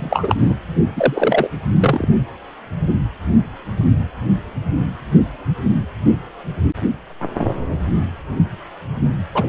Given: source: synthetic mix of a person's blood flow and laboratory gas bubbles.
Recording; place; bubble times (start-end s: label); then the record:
Doppler ultrasound of blood flow; precordium
0.00-0.55 s: bubbles
0.96-1.48 s: bubbles
1.80-2.08 s: bubbles
9.34-9.48 s: bubbles
From the record:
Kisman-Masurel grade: 223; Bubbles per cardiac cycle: several, 3 to 8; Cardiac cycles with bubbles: 10 to 50%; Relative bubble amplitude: loud (0.450 to 0.775); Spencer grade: 2 (many but less than half of the cardiac periods contain bubble signals, singularly or in groups); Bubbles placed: anywhere in the cardiac cycle